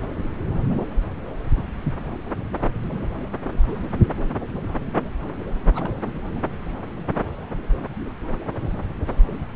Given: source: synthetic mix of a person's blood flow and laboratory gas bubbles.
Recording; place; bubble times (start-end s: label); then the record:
Doppler ultrasound of blood flow; subclavian vein
5.75-5.93 s: bubbles
From the record:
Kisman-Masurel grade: 111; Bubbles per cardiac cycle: 1 to 2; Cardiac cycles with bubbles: 1 to 10%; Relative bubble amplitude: barely perceptible (0.100 to 0.250); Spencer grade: 1 (occasional bubble signal discernible with the cardiac motion signal, with majority of cardiac periods free of bubbles); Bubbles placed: anywhere in the cardiac cycle